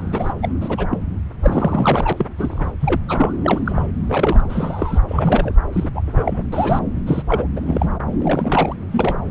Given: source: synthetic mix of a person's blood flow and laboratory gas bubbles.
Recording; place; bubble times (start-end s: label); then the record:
Doppler ultrasound of blood flow; subclavian vein
0.00-0.33 s: bubbles
0.42-0.48 s: bubbles
0.61-0.86 s: bubbles
0.90-0.98 s: bubbles
1.42-2.13 s: bubbles
2.17-2.26 s: bubbles
2.38-2.72 s: bubbles
2.80-3.00 s: bubbles
3.08-3.35 s: bubbles
3.43-3.92 s: bubbles
4.08-4.45 s: bubbles
4.49-4.99 s: bubbles
5.08-5.54 s: bubbles
5.72-5.89 s: bubbles
5.95-6.01 s: bubbles
6.05-6.42 s: bubbles
6.52-6.79 s: bubbles
7.06-7.23 s: bubbles
7.27-7.47 s: bubbles
7.55-8.00 s: bubbles
8.20-8.76 s: bubbles
8.91-9.19 s: bubbles
From the record:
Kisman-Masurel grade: 242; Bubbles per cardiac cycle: several, 3 to 8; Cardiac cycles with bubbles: 100%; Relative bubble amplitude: moderate (0.250 to 0.450); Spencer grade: 3 (all of the cardiac periods contain showers or single bubble signals, but not dominating or overriding the cardiac motion signals); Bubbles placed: anywhere in the cardiac cycle